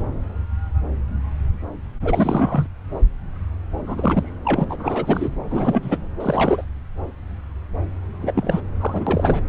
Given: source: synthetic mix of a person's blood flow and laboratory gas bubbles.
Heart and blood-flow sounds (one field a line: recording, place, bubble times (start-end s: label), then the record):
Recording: Doppler ultrasound of blood flow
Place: subclavian vein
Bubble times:
2.02-2.67 s: bubbles
3.86-4.33 s: bubbles
4.45-4.65 s: bubbles
4.69-5.29 s: bubbles
5.48-5.98 s: bubbles
6.20-6.65 s: bubbles
8.21-8.61 s: bubbles
8.80-9.42 s: bubbles
From the record:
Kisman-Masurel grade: 332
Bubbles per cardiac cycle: rolling drumbeat, 9 or more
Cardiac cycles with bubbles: 50 to 99%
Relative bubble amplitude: moderate (0.250 to 0.450)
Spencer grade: 3 (all of the cardiac periods contain showers or single bubble signals, but not dominating or overriding the cardiac motion signals)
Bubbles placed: anywhere in the cardiac cycle